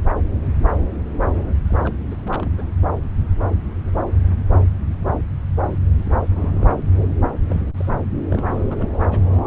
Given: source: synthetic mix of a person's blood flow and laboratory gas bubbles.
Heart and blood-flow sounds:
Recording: Doppler ultrasound of blood flow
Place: subclavian vein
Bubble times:
1.68-1.94 s: bubbles
2.10-2.17 s: bubbles
2.25-2.50 s: bubbles
2.57-2.63 s: bubbles
5.96-6.10 s: bubbles
6.13-6.27 s: bubbles
6.34-6.74 s: bubbles
7.46-7.62 s: bubbles
7.66-7.73 s: bubbles
7.76-7.90 s: bubbles
8.29-8.95 s: bubbles
9.11-9.19 s: bubbles
From the record:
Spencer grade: 2 (many but less than half of the cardiac periods contain bubble signals, singularly or in groups)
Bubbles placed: anywhere in the cardiac cycle

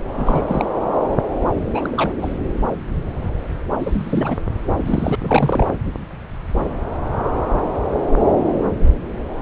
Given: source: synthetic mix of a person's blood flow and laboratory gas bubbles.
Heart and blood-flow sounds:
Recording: Doppler ultrasound of blood flow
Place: subclavian vein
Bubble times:
0.18-0.41 s: bubbles
0.47-0.66 s: bubbles
1.73-2.33 s: bubbles
3.79-4.38 s: bubbles
4.76-5.16 s: bubbles
5.20-5.67 s: bubbles
From the record:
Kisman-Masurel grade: 222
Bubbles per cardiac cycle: several, 3 to 8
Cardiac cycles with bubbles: 10 to 50%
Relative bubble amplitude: moderate (0.250 to 0.450)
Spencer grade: 2 (many but less than half of the cardiac periods contain bubble signals, singularly or in groups)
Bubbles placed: anywhere in the cardiac cycle

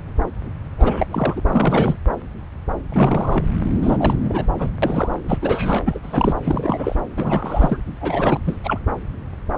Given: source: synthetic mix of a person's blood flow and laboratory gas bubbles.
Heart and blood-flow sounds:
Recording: Doppler ultrasound of blood flow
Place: subclavian vein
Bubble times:
0.78-1.06 s: bubbles
1.10-1.41 s: bubbles
1.45-1.96 s: bubbles
2.92-3.54 s: bubbles
3.82-4.14 s: bubbles
4.20-4.45 s: bubbles
4.58-4.71 s: bubbles
4.82-5.14 s: bubbles
5.25-5.38 s: bubbles
5.41-5.99 s: bubbles
6.03-6.33 s: bubbles
6.44-6.96 s: bubbles
7.16-7.80 s: bubbles
8.01-8.39 s: bubbles
8.44-8.57 s: bubbles
8.63-8.79 s: bubbles
From the record:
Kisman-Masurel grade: 332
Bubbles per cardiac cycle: rolling drumbeat, 9 or more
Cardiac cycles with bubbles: 50 to 99%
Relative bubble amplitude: moderate (0.250 to 0.450)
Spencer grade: 3 (all of the cardiac periods contain showers or single bubble signals, but not dominating or overriding the cardiac motion signals)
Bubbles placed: anywhere in the cardiac cycle

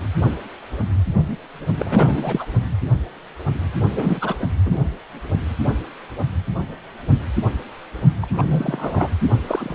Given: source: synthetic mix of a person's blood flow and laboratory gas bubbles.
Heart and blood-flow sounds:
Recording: Doppler ultrasound of blood flow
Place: precordium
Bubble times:
1.26-1.38 s: bubbles
1.77-2.46 s: bubbles
3.95-4.35 s: bubbles
4.65-4.78 s: bubbles
8.21-9.10 s: bubbles
9.47-9.75 s: bubbles
From the record:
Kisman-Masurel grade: 222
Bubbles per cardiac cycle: several, 3 to 8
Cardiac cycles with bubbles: 10 to 50%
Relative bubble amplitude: moderate (0.250 to 0.450)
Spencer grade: 2 (many but less than half of the cardiac periods contain bubble signals, singularly or in groups)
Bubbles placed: only in the low amplitude regions of the cardiac cycle

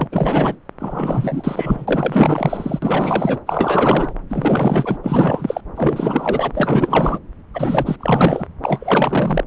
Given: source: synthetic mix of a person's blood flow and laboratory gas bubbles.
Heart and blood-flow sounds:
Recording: Doppler ultrasound of blood flow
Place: subclavian vein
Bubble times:
0.00-0.56 s: bubbles
0.79-2.79 s: bubbles
2.82-3.40 s: bubbles
3.46-4.14 s: bubbles
4.29-4.97 s: bubbles
5.03-5.61 s: bubbles
5.75-7.18 s: bubbles
7.54-7.96 s: bubbles
7.99-8.47 s: bubbles
8.62-9.44 s: bubbles
From the record:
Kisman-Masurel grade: 444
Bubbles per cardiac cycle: continuous sound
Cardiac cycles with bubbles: 100%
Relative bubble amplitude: maximal (0.775 to 0.999)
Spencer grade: 4 (maximum detectable bubble signal sounding continuously throughout systole and diastole of every cardiac period, and overriding the amplitude of the normal cardiac signals)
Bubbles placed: anywhere in the cardiac cycle

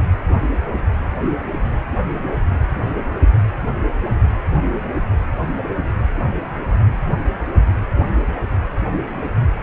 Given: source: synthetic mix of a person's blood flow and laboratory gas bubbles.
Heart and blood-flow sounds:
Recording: Doppler ultrasound of blood flow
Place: precordium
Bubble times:
9.55-9.63 s: bubbles
From the record:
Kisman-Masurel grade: 211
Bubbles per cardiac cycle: several, 3 to 8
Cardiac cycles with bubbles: 1 to 10%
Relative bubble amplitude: barely perceptible (0.100 to 0.250)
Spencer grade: 1 (occasional bubble signal discernible with the cardiac motion signal, with majority of cardiac periods free of bubbles)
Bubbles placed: anywhere in the cardiac cycle

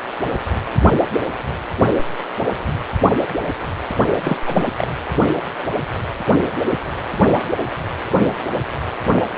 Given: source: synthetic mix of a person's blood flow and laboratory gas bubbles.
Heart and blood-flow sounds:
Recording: Doppler ultrasound of blood flow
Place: precordium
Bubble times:
4.23-4.38 s: bubbles
4.46-4.66 s: bubbles
4.78-4.88 s: bubbles
From the record:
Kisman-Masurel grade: 212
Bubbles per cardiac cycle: several, 3 to 8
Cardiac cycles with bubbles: 1 to 10%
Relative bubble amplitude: moderate (0.250 to 0.450)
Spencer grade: 1 (occasional bubble signal discernible with the cardiac motion signal, with majority of cardiac periods free of bubbles)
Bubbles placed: only in the low amplitude regions of the cardiac cycle

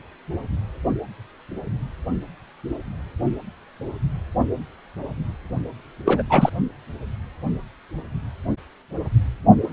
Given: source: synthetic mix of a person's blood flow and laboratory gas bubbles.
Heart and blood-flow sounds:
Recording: Doppler ultrasound of blood flow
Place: precordium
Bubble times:
6.05-6.22 s: bubbles
6.30-6.50 s: bubbles
From the record:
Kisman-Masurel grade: 213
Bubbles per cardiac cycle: several, 3 to 8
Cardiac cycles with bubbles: 1 to 10%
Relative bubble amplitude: loud (0.450 to 0.775)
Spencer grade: 1 (occasional bubble signal discernible with the cardiac motion signal, with majority of cardiac periods free of bubbles)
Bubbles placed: only in the low amplitude regions of the cardiac cycle

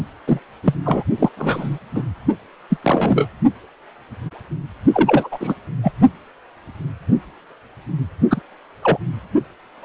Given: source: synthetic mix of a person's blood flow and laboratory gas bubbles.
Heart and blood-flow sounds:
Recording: Doppler ultrasound of blood flow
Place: precordium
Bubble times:
0.28-0.40 s: bubbles
0.63-0.74 s: bubbles
0.84-1.03 s: bubbles
1.18-1.29 s: bubbles
1.36-1.78 s: bubbles
1.95-2.03 s: bubbles
2.69-2.77 s: bubbles
2.83-3.29 s: bubbles
4.93-5.29 s: bubbles
5.32-5.54 s: bubbles
5.83-5.92 s: bubbles
8.29-8.41 s: bubbles
8.82-8.98 s: bubbles
9.82-9.85 s: bubbles
From the record:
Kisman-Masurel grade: 233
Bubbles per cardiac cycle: several, 3 to 8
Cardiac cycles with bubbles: 50 to 99%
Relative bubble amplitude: loud (0.450 to 0.775)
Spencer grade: 3 (all of the cardiac periods contain showers or single bubble signals, but not dominating or overriding the cardiac motion signals)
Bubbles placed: only in the low amplitude regions of the cardiac cycle

